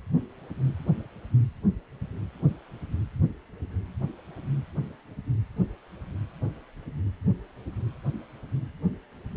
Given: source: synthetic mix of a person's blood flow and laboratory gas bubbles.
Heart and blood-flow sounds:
Doppler ultrasound of blood flow; precordium
no bubbles
From the record:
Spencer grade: 0 (complete lack of bubble signals)

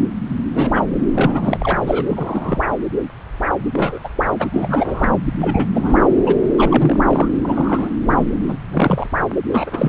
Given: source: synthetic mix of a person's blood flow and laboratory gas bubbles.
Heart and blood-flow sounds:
Doppler ultrasound of blood flow; subclavian vein
0.31-0.36 s: bubbles
0.54-0.83 s: bubbles
1.14-1.80 s: bubbles
1.87-2.64 s: bubbles
3.73-3.99 s: bubbles
4.04-4.08 s: bubbles
4.38-4.47 s: bubbles
4.54-5.09 s: bubbles
5.41-5.69 s: bubbles
5.74-6.05 s: bubbles
6.26-6.36 s: bubbles
6.52-7.03 s: bubbles
7.08-7.28 s: bubbles
7.42-7.90 s: bubbles
8.05-8.24 s: bubbles
8.44-8.56 s: bubbles
8.70-9.07 s: bubbles
9.51-9.89 s: bubbles
From the record:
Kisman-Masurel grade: 242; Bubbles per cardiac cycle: several, 3 to 8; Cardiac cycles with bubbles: 100%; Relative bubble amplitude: moderate (0.250 to 0.450); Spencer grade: 3 (all of the cardiac periods contain showers or single bubble signals, but not dominating or overriding the cardiac motion signals); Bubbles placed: anywhere in the cardiac cycle

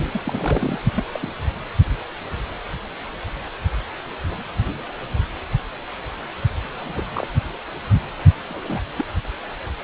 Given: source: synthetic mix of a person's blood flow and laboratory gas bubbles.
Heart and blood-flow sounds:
Doppler ultrasound of blood flow; precordium
0.13-0.80 s: bubbles
0.95-1.04 s: bubbles
1.12-1.30 s: bubbles
6.63-6.68 s: bubbles
6.72-7.05 s: bubbles
7.14-7.27 s: bubbles
8.49-8.92 s: bubbles
8.96-9.04 s: bubbles
From the record:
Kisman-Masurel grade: 221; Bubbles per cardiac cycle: several, 3 to 8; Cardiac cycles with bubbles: 10 to 50%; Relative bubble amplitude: barely perceptible (0.100 to 0.250); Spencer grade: 2 (many but less than half of the cardiac periods contain bubble signals, singularly or in groups); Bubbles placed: only in the low amplitude regions of the cardiac cycle

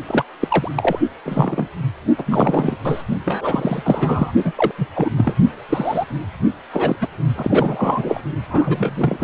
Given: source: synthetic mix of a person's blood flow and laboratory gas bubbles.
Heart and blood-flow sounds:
Doppler ultrasound of blood flow; precordium
0.09-0.23 s: bubbles
0.41-0.71 s: bubbles
0.75-0.99 s: bubbles
1.25-1.67 s: bubbles
2.18-2.77 s: bubbles
2.84-3.02 s: bubbles
3.25-4.32 s: bubbles
4.44-4.52 s: bubbles
4.55-4.71 s: bubbles
4.77-4.87 s: bubbles
4.95-5.10 s: bubbles
5.17-5.33 s: bubbles
5.69-6.06 s: bubbles
6.72-6.96 s: bubbles
7.01-7.07 s: bubbles
7.35-8.21 s: bubbles
8.49-9.24 s: bubbles
From the record:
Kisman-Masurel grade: 243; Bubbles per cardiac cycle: several, 3 to 8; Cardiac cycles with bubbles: 100%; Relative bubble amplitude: loud (0.450 to 0.775); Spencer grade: 3 (all of the cardiac periods contain showers or single bubble signals, but not dominating or overriding the cardiac motion signals); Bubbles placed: only in the low amplitude regions of the cardiac cycle

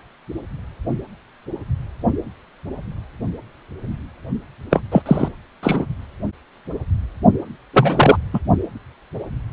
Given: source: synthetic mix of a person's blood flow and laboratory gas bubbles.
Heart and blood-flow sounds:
Doppler ultrasound of blood flow; precordium
4.71-4.82 s: bubbles
4.92-5.02 s: bubbles
5.06-5.29 s: bubbles
5.62-5.86 s: bubbles
7.73-8.17 s: bubbles
8.33-8.39 s: bubbles
From the record:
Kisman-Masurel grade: 223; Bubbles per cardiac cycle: several, 3 to 8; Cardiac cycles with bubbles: 10 to 50%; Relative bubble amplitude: loud (0.450 to 0.775); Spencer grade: 2 (many but less than half of the cardiac periods contain bubble signals, singularly or in groups); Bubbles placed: only in the low amplitude regions of the cardiac cycle

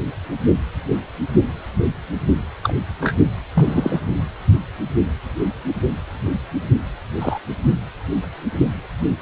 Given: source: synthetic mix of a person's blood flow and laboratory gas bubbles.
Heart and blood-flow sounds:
Doppler ultrasound of blood flow; precordium
2.63-2.74 s: bubbles
3.01-3.15 s: bubbles
3.55-4.00 s: bubbles
7.20-7.38 s: bubbles
From the record:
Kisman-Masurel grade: 122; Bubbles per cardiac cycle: 1 to 2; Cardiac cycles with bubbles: 10 to 50%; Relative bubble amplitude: moderate (0.250 to 0.450); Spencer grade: 2 (many but less than half of the cardiac periods contain bubble signals, singularly or in groups); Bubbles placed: only in the low amplitude regions of the cardiac cycle

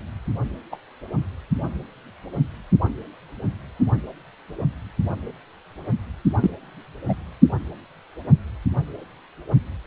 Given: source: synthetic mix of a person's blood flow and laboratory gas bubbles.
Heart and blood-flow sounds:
Doppler ultrasound of blood flow; precordium
0.71-0.77 s: bubbles
6.41-6.51 s: bubbles
7.09-7.14 s: bubbles
From the record:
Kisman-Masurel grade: 122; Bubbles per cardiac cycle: 1 to 2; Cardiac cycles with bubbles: 10 to 50%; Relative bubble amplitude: moderate (0.250 to 0.450); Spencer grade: 2 (many but less than half of the cardiac periods contain bubble signals, singularly or in groups); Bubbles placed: only in the low amplitude regions of the cardiac cycle

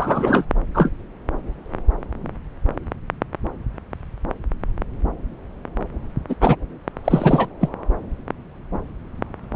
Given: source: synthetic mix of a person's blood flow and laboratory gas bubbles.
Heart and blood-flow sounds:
Doppler ultrasound of blood flow; subclavian vein
0.00-0.45 s: bubbles
0.74-0.90 s: bubbles
6.28-6.35 s: bubbles
6.41-6.56 s: bubbles
7.04-7.49 s: bubbles
7.61-7.69 s: bubbles
From the record:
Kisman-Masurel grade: 223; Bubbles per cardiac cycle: several, 3 to 8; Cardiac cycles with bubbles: 10 to 50%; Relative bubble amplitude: loud (0.450 to 0.775); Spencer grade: 2 (many but less than half of the cardiac periods contain bubble signals, singularly or in groups); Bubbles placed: anywhere in the cardiac cycle

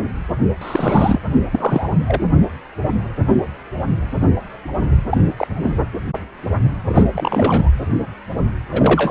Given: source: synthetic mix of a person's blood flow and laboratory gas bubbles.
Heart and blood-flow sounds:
Doppler ultrasound of blood flow; precordium
0.61-1.22 s: bubbles
1.52-1.95 s: bubbles
2.06-2.24 s: bubbles
5.09-5.22 s: bubbles
5.37-5.47 s: bubbles
5.62-5.76 s: bubbles
6.86-7.05 s: bubbles
7.12-7.69 s: bubbles
8.71-9.11 s: bubbles
From the record:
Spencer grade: 2 (many but less than half of the cardiac periods contain bubble signals, singularly or in groups); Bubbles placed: anywhere in the cardiac cycle

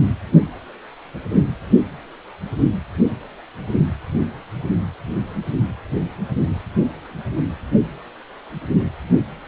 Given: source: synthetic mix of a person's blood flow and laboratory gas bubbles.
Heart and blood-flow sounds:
Doppler ultrasound of blood flow; precordium
no bubbles
From the record:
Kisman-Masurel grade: 000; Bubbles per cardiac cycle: 0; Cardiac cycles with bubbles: 0%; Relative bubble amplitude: no bubbles discernible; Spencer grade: 0 (complete lack of bubble signals)

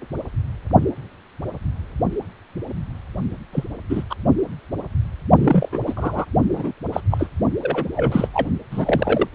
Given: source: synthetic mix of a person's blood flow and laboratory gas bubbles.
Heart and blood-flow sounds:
Doppler ultrasound of blood flow; precordium
3.52-3.64 s: bubbles
3.89-4.03 s: bubbles
4.09-4.14 s: bubbles
5.38-5.68 s: bubbles
5.72-5.83 s: bubbles
5.86-6.25 s: bubbles
6.52-6.72 s: bubbles
6.92-7.00 s: bubbles
7.10-7.28 s: bubbles
7.62-7.86 s: bubbles
7.96-8.28 s: bubbles
8.33-8.46 s: bubbles
8.71-9.27 s: bubbles
From the record:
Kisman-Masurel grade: 232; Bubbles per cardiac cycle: several, 3 to 8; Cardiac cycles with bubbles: 50 to 99%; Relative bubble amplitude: moderate (0.250 to 0.450); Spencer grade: 3 (all of the cardiac periods contain showers or single bubble signals, but not dominating or overriding the cardiac motion signals); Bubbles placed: only in the low amplitude regions of the cardiac cycle

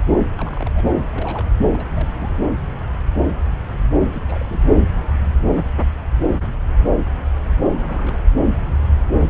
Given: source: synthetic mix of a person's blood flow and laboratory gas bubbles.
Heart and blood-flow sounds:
Doppler ultrasound of blood flow; subclavian vein
0.36-0.71 s: bubbles
0.75-0.84 s: bubbles
1.01-1.48 s: bubbles
1.61-1.68 s: bubbles
1.74-1.85 s: bubbles
1.92-2.38 s: bubbles
4.08-4.70 s: bubbles
7.75-8.21 s: bubbles
9.14-9.29 s: bubbles
From the record:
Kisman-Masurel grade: 221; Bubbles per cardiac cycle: several, 3 to 8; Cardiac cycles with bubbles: 10 to 50%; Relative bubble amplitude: barely perceptible (0.100 to 0.250); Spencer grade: 2 (many but less than half of the cardiac periods contain bubble signals, singularly or in groups); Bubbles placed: anywhere in the cardiac cycle

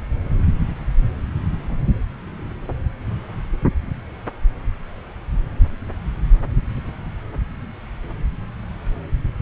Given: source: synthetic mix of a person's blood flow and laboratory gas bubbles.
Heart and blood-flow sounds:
Doppler ultrasound of blood flow; subclavian vein
no bubbles
From the record:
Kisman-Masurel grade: 000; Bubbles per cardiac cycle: 0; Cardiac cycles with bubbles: 0%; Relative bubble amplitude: no bubbles discernible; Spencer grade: 0 (complete lack of bubble signals)

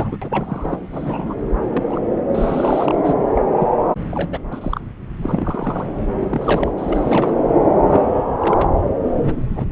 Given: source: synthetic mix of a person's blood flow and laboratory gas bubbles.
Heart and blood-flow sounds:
Doppler ultrasound of blood flow; subclavian vein
0.00-0.17 s: bubbles
0.21-0.79 s: bubbles
0.92-1.35 s: bubbles
1.73-2.00 s: bubbles
2.34-3.13 s: bubbles
3.17-3.24 s: bubbles
3.34-3.44 s: bubbles
3.58-3.68 s: bubbles
4.12-4.42 s: bubbles
4.51-4.81 s: bubbles
5.16-5.86 s: bubbles
6.18-6.74 s: bubbles
6.78-7.33 s: bubbles
7.89-8.14 s: bubbles
8.39-8.70 s: bubbles
9.23-9.33 s: bubbles
9.55-9.67 s: bubbles
From the record:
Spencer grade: 3 (all of the cardiac periods contain showers or single bubble signals, but not dominating or overriding the cardiac motion signals); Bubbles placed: anywhere in the cardiac cycle

